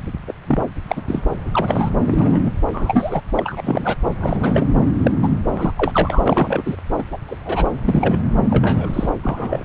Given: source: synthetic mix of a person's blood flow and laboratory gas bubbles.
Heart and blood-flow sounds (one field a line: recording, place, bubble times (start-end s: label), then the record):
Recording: Doppler ultrasound of blood flow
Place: subclavian vein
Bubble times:
0.28-0.33 s: bubbles
0.48-0.65 s: bubbles
0.88-1.02 s: bubbles
1.07-1.22 s: bubbles
1.44-1.89 s: bubbles
2.03-2.41 s: bubbles
2.44-2.52 s: bubbles
2.68-3.21 s: bubbles
3.36-3.96 s: bubbles
4.20-4.67 s: bubbles
5.03-5.12 s: bubbles
5.23-5.29 s: bubbles
5.51-5.72 s: bubbles
5.77-6.22 s: bubbles
6.25-6.76 s: bubbles
6.98-7.03 s: bubbles
7.12-7.18 s: bubbles
7.28-7.36 s: bubbles
7.45-7.67 s: bubbles
7.84-8.18 s: bubbles
8.50-9.10 s: bubbles
9.23-9.65 s: bubbles
From the record:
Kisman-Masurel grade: 242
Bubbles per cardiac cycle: several, 3 to 8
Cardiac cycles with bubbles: 100%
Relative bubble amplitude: moderate (0.250 to 0.450)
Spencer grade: 3 (all of the cardiac periods contain showers or single bubble signals, but not dominating or overriding the cardiac motion signals)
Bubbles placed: anywhere in the cardiac cycle